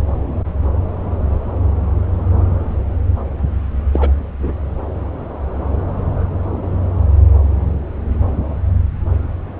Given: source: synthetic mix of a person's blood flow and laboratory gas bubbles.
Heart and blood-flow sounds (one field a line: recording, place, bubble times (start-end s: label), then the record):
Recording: Doppler ultrasound of blood flow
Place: subclavian vein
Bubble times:
3.93-4.12 s: bubbles
4.39-4.53 s: bubbles
From the record:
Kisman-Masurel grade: 213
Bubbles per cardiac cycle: several, 3 to 8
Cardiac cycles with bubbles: 1 to 10%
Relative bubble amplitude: loud (0.450 to 0.775)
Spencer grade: 1 (occasional bubble signal discernible with the cardiac motion signal, with majority of cardiac periods free of bubbles)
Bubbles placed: anywhere in the cardiac cycle